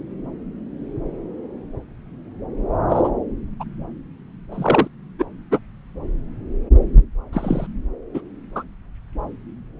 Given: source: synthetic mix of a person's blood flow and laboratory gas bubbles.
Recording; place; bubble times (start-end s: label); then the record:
Doppler ultrasound of blood flow; subclavian vein
2.89-3.08 s: bubbles
3.60-3.64 s: bubbles
4.51-4.88 s: bubbles
5.18-5.25 s: bubbles
5.51-5.59 s: bubbles
7.33-7.67 s: bubbles
8.14-8.21 s: bubbles
8.55-8.62 s: bubbles
From the record:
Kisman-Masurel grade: 122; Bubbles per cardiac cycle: 1 to 2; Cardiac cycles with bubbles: 10 to 50%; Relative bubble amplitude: moderate (0.250 to 0.450); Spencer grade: 2 (many but less than half of the cardiac periods contain bubble signals, singularly or in groups); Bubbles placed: anywhere in the cardiac cycle